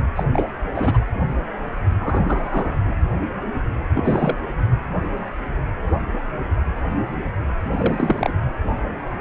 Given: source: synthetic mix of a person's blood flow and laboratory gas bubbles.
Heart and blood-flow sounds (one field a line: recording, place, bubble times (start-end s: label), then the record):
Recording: Doppler ultrasound of blood flow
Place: precordium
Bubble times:
0.16-0.23 s: bubbles
0.34-0.45 s: bubbles
0.74-0.97 s: bubbles
2.00-2.77 s: bubbles
2.85-2.94 s: bubbles
3.94-4.36 s: bubbles
7.59-8.33 s: bubbles
From the record:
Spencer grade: 2 (many but less than half of the cardiac periods contain bubble signals, singularly or in groups)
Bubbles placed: anywhere in the cardiac cycle